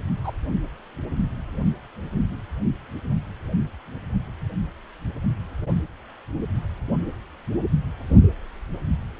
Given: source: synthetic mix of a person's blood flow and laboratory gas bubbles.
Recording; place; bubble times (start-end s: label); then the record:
Doppler ultrasound of blood flow; precordium
0.24-0.31 s: bubbles
From the record:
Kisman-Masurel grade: 112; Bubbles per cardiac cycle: 1 to 2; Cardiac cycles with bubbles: 1 to 10%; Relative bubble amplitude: moderate (0.250 to 0.450); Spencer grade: 1 (occasional bubble signal discernible with the cardiac motion signal, with majority of cardiac periods free of bubbles); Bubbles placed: only in the low amplitude regions of the cardiac cycle